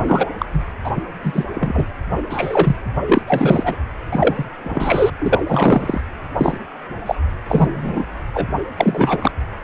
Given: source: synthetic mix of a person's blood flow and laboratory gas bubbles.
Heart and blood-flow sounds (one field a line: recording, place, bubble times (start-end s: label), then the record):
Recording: Doppler ultrasound of blood flow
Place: precordium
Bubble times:
0.07-0.29 s: bubbles
0.38-0.46 s: bubbles
0.53-0.64 s: bubbles
0.83-0.92 s: bubbles
0.97-1.02 s: bubbles
1.24-1.46 s: bubbles
1.54-1.86 s: bubbles
2.29-2.76 s: bubbles
3.06-3.21 s: bubbles
3.27-3.76 s: bubbles
4.12-4.44 s: bubbles
4.64-5.10 s: bubbles
5.19-5.42 s: bubbles
5.48-6.01 s: bubbles
6.36-6.58 s: bubbles
7.06-7.16 s: bubbles
7.49-8.05 s: bubbles
8.34-8.47 s: bubbles
8.80-9.31 s: bubbles
From the record:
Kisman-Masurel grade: 243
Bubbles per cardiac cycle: several, 3 to 8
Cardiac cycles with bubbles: 100%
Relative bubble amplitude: loud (0.450 to 0.775)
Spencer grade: 3 (all of the cardiac periods contain showers or single bubble signals, but not dominating or overriding the cardiac motion signals)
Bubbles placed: anywhere in the cardiac cycle